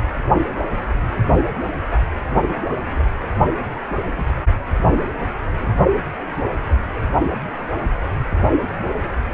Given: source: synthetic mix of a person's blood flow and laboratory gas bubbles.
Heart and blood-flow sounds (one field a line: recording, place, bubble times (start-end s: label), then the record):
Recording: Doppler ultrasound of blood flow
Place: precordium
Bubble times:
2.46-2.62 s: bubbles
4.04-4.11 s: bubbles
4.16-4.27 s: bubbles
4.74-4.79 s: bubbles
4.82-4.90 s: bubbles
4.93-5.04 s: bubbles
5.61-5.69 s: bubbles
From the record:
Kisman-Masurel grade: 121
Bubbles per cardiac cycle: 1 to 2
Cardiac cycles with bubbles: 10 to 50%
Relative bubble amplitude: barely perceptible (0.100 to 0.250)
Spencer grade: 2 (many but less than half of the cardiac periods contain bubble signals, singularly or in groups)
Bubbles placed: only in the low amplitude regions of the cardiac cycle